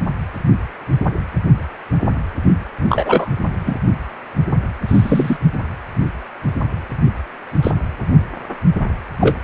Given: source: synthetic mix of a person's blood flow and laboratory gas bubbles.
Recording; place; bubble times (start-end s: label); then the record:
Doppler ultrasound of blood flow; precordium
2.89-3.29 s: bubbles
3.65-3.77 s: bubbles
4.88-5.37 s: bubbles
7.62-7.71 s: bubbles
9.21-9.37 s: bubbles
From the record:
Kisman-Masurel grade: 123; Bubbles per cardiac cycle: 1 to 2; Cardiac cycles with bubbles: 10 to 50%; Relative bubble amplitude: loud (0.450 to 0.775); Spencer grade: 2 (many but less than half of the cardiac periods contain bubble signals, singularly or in groups); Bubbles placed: anywhere in the cardiac cycle